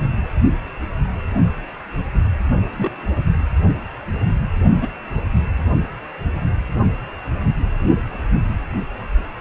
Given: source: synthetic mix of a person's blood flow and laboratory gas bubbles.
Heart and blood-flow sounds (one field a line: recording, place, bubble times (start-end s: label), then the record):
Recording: Doppler ultrasound of blood flow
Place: precordium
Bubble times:
2.77-2.92 s: bubbles
4.81-4.88 s: bubbles
From the record:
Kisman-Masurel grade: 122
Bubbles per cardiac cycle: 1 to 2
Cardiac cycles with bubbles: 10 to 50%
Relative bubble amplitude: moderate (0.250 to 0.450)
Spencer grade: 2 (many but less than half of the cardiac periods contain bubble signals, singularly or in groups)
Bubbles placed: only in the low amplitude regions of the cardiac cycle